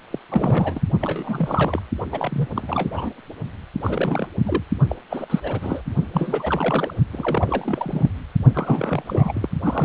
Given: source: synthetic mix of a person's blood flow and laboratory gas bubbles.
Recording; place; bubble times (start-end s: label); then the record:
Doppler ultrasound of blood flow; precordium
0.11-0.19 s: bubbles
0.29-0.81 s: bubbles
1.00-1.82 s: bubbles
2.12-2.47 s: bubbles
2.56-3.10 s: bubbles
3.83-4.27 s: bubbles
4.44-4.63 s: bubbles
4.89-4.96 s: bubbles
5.10-5.25 s: bubbles
5.29-5.40 s: bubbles
5.43-5.82 s: bubbles
6.12-6.94 s: bubbles
7.12-8.11 s: bubbles
8.53-9.49 s: bubbles
9.63-9.85 s: bubbles
From the record:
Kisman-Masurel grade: 342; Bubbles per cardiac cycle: rolling drumbeat, 9 or more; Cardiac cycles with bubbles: 100%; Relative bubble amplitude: moderate (0.250 to 0.450); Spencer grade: 3 (all of the cardiac periods contain showers or single bubble signals, but not dominating or overriding the cardiac motion signals); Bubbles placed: only in the low amplitude regions of the cardiac cycle